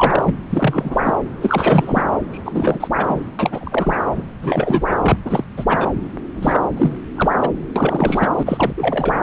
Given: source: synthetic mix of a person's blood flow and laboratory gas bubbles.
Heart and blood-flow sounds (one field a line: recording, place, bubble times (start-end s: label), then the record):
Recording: Doppler ultrasound of blood flow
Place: subclavian vein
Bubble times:
0.00-0.36 s: bubbles
0.50-1.17 s: bubbles
1.41-2.03 s: bubbles
2.32-2.88 s: bubbles
2.97-3.25 s: bubbles
3.39-3.97 s: bubbles
4.12-4.22 s: bubbles
4.42-4.96 s: bubbles
5.02-5.17 s: bubbles
5.25-5.44 s: bubbles
5.57-5.65 s: bubbles
5.67-5.91 s: bubbles
6.34-6.69 s: bubbles
6.75-7.00 s: bubbles
7.16-7.29 s: bubbles
7.41-7.50 s: bubbles
7.75-8.28 s: bubbles
8.38-8.72 s: bubbles
8.76-9.14 s: bubbles
From the record:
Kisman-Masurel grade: 343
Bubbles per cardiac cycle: rolling drumbeat, 9 or more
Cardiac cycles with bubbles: 100%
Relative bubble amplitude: loud (0.450 to 0.775)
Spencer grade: 3 (all of the cardiac periods contain showers or single bubble signals, but not dominating or overriding the cardiac motion signals)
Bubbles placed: anywhere in the cardiac cycle